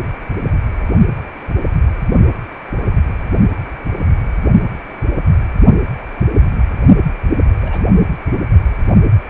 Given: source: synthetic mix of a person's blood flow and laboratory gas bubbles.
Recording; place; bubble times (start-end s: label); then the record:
Doppler ultrasound of blood flow; precordium
0.03-0.08 s: bubbles
6.43-6.51 s: bubbles
7.61-7.82 s: bubbles
8.32-8.37 s: bubbles
From the record:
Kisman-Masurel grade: 121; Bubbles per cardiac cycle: 1 to 2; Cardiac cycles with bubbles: 10 to 50%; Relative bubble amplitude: barely perceptible (0.100 to 0.250); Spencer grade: 2 (many but less than half of the cardiac periods contain bubble signals, singularly or in groups); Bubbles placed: only in the low amplitude regions of the cardiac cycle